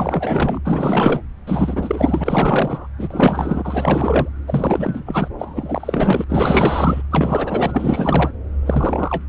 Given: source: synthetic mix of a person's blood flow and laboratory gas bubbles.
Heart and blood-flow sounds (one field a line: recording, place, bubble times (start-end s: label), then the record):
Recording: Doppler ultrasound of blood flow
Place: subclavian vein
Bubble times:
0.00-0.60 s: bubbles
0.64-1.22 s: bubbles
1.47-2.88 s: bubbles
2.98-4.29 s: bubbles
4.47-5.28 s: bubbles
5.38-6.24 s: bubbles
6.29-7.03 s: bubbles
7.11-8.30 s: bubbles
8.65-9.24 s: bubbles
From the record:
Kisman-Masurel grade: 444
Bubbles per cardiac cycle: continuous sound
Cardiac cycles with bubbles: 100%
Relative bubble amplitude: maximal (0.775 to 0.999)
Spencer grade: 4 (maximum detectable bubble signal sounding continuously throughout systole and diastole of every cardiac period, and overriding the amplitude of the normal cardiac signals)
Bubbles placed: anywhere in the cardiac cycle